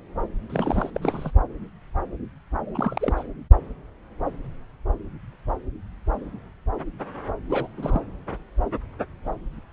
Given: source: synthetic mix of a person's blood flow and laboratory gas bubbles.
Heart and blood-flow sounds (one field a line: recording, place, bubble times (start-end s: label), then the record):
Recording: Doppler ultrasound of blood flow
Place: subclavian vein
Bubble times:
0.49-0.90 s: bubbles
0.94-1.30 s: bubbles
2.74-3.14 s: bubbles
3.17-3.23 s: bubbles
7.49-7.67 s: bubbles
7.77-8.01 s: bubbles
From the record:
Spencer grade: 2 (many but less than half of the cardiac periods contain bubble signals, singularly or in groups)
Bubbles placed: anywhere in the cardiac cycle